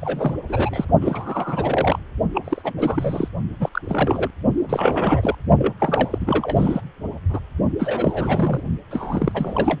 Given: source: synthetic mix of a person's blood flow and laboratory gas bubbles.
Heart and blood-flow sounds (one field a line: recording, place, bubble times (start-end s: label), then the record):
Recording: Doppler ultrasound of blood flow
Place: precordium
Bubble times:
0.02-0.34 s: bubbles
0.49-0.85 s: bubbles
1.01-1.99 s: bubbles
2.34-2.73 s: bubbles
2.77-3.28 s: bubbles
3.60-3.69 s: bubbles
3.73-3.81 s: bubbles
3.83-4.30 s: bubbles
4.69-5.35 s: bubbles
5.58-5.73 s: bubbles
5.79-6.80 s: bubbles
7.29-7.40 s: bubbles
7.79-8.63 s: bubbles
8.90-9.79 s: bubbles
From the record:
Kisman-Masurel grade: 332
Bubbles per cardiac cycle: rolling drumbeat, 9 or more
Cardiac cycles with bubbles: 50 to 99%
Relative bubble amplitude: moderate (0.250 to 0.450)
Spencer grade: 3 (all of the cardiac periods contain showers or single bubble signals, but not dominating or overriding the cardiac motion signals)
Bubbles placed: only in the low amplitude regions of the cardiac cycle